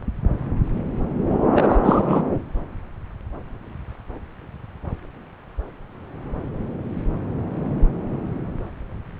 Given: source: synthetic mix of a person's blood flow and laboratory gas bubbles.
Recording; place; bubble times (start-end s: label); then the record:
Doppler ultrasound of blood flow; subclavian vein
1.54-1.77 s: bubbles
1.83-2.23 s: bubbles
From the record:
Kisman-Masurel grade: 213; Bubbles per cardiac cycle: several, 3 to 8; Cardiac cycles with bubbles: 1 to 10%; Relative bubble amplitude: loud (0.450 to 0.775); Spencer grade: 1 (occasional bubble signal discernible with the cardiac motion signal, with majority of cardiac periods free of bubbles); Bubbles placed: anywhere in the cardiac cycle